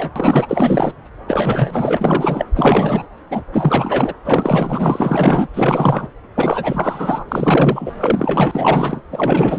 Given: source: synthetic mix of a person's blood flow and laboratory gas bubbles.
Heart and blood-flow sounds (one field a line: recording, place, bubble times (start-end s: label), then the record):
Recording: Doppler ultrasound of blood flow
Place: subclavian vein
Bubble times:
0.00-0.10 s: bubbles
0.15-0.94 s: bubbles
1.27-2.46 s: bubbles
2.56-3.05 s: bubbles
3.30-3.42 s: bubbles
3.52-4.14 s: bubbles
4.25-5.48 s: bubbles
5.54-6.07 s: bubbles
6.35-7.23 s: bubbles
7.28-7.92 s: bubbles
7.98-9.02 s: bubbles
9.11-9.59 s: bubbles
From the record:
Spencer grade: 4 (maximum detectable bubble signal sounding continuously throughout systole and diastole of every cardiac period, and overriding the amplitude of the normal cardiac signals)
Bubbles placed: anywhere in the cardiac cycle